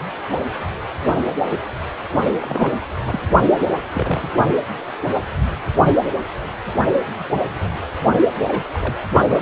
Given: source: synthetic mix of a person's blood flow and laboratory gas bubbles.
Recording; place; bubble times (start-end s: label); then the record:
Doppler ultrasound of blood flow; precordium
2.40-2.77 s: bubbles
3.05-3.21 s: bubbles
3.40-3.48 s: bubbles
3.95-4.29 s: bubbles
8.43-8.65 s: bubbles
8.73-8.95 s: bubbles
9.28-9.41 s: bubbles
From the record:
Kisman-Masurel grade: 221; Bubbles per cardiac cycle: several, 3 to 8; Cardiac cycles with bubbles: 10 to 50%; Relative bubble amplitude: barely perceptible (0.100 to 0.250); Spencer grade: 2 (many but less than half of the cardiac periods contain bubble signals, singularly or in groups); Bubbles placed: only in the low amplitude regions of the cardiac cycle